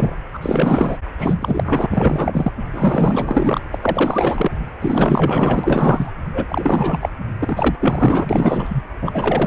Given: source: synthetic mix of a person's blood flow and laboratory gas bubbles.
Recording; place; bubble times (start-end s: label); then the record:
Doppler ultrasound of blood flow; precordium
0.00-0.15 s: bubbles
0.33-0.97 s: bubbles
1.18-1.86 s: bubbles
1.91-2.53 s: bubbles
2.71-3.60 s: bubbles
3.71-3.79 s: bubbles
3.81-4.51 s: bubbles
4.81-6.10 s: bubbles
6.33-6.46 s: bubbles
6.48-7.09 s: bubbles
7.38-7.75 s: bubbles
7.81-8.27 s: bubbles
8.29-8.83 s: bubbles
9.01-9.47 s: bubbles
From the record:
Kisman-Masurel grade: 444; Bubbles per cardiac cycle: continuous sound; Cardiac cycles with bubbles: 100%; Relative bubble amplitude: maximal (0.775 to 0.999); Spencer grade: 4 (maximum detectable bubble signal sounding continuously throughout systole and diastole of every cardiac period, and overriding the amplitude of the normal cardiac signals); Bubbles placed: anywhere in the cardiac cycle